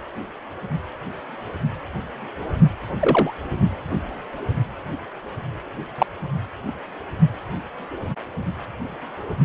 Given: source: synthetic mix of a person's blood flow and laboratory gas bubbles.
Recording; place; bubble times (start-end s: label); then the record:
Doppler ultrasound of blood flow; precordium
3.00-3.32 s: bubbles
5.98-6.06 s: bubbles
From the record:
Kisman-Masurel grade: 123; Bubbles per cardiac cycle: 1 to 2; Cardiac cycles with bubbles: 10 to 50%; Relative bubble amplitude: loud (0.450 to 0.775); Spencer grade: 2 (many but less than half of the cardiac periods contain bubble signals, singularly or in groups); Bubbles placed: only in the low amplitude regions of the cardiac cycle